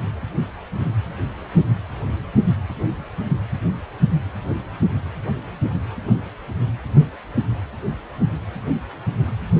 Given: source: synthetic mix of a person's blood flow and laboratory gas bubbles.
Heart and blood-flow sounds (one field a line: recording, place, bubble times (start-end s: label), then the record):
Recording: Doppler ultrasound of blood flow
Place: precordium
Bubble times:
no bubbles
From the record:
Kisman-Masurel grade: 000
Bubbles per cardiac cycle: 0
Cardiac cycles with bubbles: 0%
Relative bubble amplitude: no bubbles discernible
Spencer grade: 0 (complete lack of bubble signals)